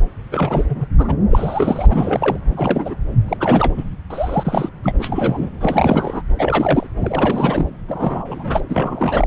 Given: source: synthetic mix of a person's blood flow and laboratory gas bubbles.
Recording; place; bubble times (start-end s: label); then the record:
Doppler ultrasound of blood flow; subclavian vein
0.31-0.85 s: bubbles
0.98-1.16 s: bubbles
1.30-1.86 s: bubbles
1.89-2.38 s: bubbles
2.50-2.96 s: bubbles
3.28-3.37 s: bubbles
3.40-3.75 s: bubbles
3.78-3.84 s: bubbles
4.10-4.69 s: bubbles
4.83-4.96 s: bubbles
4.99-5.50 s: bubbles
5.60-6.21 s: bubbles
6.38-6.87 s: bubbles
7.00-7.66 s: bubbles
7.88-8.61 s: bubbles
8.69-9.27 s: bubbles
From the record:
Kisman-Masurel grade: 342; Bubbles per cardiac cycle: rolling drumbeat, 9 or more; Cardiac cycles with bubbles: 100%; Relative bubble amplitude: moderate (0.250 to 0.450); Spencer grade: 3 (all of the cardiac periods contain showers or single bubble signals, but not dominating or overriding the cardiac motion signals); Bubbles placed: anywhere in the cardiac cycle